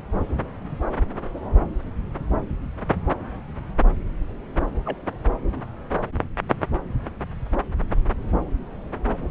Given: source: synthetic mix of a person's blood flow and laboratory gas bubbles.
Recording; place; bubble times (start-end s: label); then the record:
Doppler ultrasound of blood flow; subclavian vein
4.85-4.97 s: bubbles
From the record:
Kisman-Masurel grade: 111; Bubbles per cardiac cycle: 1 to 2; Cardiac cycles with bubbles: 1 to 10%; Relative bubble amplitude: barely perceptible (0.100 to 0.250); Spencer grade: 1 (occasional bubble signal discernible with the cardiac motion signal, with majority of cardiac periods free of bubbles); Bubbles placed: anywhere in the cardiac cycle